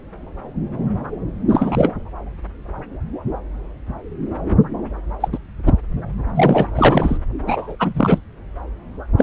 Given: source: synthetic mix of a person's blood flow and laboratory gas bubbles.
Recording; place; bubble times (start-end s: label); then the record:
Doppler ultrasound of blood flow; subclavian vein
1.48-1.89 s: bubbles
5.20-5.28 s: bubbles
5.32-5.38 s: bubbles
5.65-5.74 s: bubbles
6.35-6.67 s: bubbles
6.75-7.17 s: bubbles
7.46-7.75 s: bubbles
7.79-8.19 s: bubbles
9.18-9.23 s: bubbles
From the record:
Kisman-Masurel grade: 223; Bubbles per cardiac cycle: several, 3 to 8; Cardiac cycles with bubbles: 10 to 50%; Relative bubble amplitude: loud (0.450 to 0.775); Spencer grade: 2 (many but less than half of the cardiac periods contain bubble signals, singularly or in groups); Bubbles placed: anywhere in the cardiac cycle